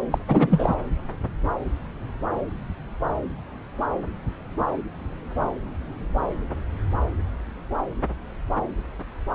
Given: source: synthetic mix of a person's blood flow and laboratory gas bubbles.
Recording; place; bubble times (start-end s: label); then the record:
Doppler ultrasound of blood flow; subclavian vein
0.11-0.18 s: bubbles
0.28-0.75 s: bubbles
From the record:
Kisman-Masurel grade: 212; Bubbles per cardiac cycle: several, 3 to 8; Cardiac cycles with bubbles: 1 to 10%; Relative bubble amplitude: moderate (0.250 to 0.450); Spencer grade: 1 (occasional bubble signal discernible with the cardiac motion signal, with majority of cardiac periods free of bubbles); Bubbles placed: anywhere in the cardiac cycle